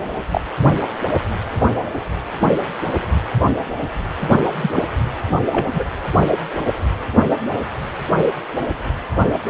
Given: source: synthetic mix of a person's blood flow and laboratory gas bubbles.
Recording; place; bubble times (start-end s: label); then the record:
Doppler ultrasound of blood flow; precordium
0.31-0.41 s: bubbles
4.61-4.71 s: bubbles
4.75-4.82 s: bubbles
5.52-5.67 s: bubbles
5.73-5.83 s: bubbles
From the record:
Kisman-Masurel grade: 123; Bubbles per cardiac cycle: 1 to 2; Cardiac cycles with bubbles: 10 to 50%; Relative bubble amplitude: loud (0.450 to 0.775); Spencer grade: 2 (many but less than half of the cardiac periods contain bubble signals, singularly or in groups); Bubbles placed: anywhere in the cardiac cycle